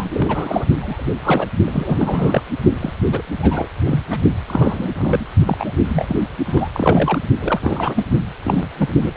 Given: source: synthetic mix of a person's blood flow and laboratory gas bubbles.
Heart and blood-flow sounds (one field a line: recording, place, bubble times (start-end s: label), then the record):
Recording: Doppler ultrasound of blood flow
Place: precordium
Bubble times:
0.00-0.65 s: bubbles
0.79-1.47 s: bubbles
1.66-2.43 s: bubbles
2.79-2.92 s: bubbles
3.12-3.22 s: bubbles
3.39-3.69 s: bubbles
3.84-4.03 s: bubbles
4.10-4.20 s: bubbles
4.48-4.90 s: bubbles
4.98-5.27 s: bubbles
5.47-5.72 s: bubbles
5.84-6.20 s: bubbles
6.45-6.69 s: bubbles
6.73-7.19 s: bubbles
7.40-8.05 s: bubbles
8.44-8.68 s: bubbles
8.77-8.88 s: bubbles
9.02-9.12 s: bubbles
From the record:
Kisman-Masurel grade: 242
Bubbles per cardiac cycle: several, 3 to 8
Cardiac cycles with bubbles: 100%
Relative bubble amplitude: moderate (0.250 to 0.450)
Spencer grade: 3 (all of the cardiac periods contain showers or single bubble signals, but not dominating or overriding the cardiac motion signals)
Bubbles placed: only in the low amplitude regions of the cardiac cycle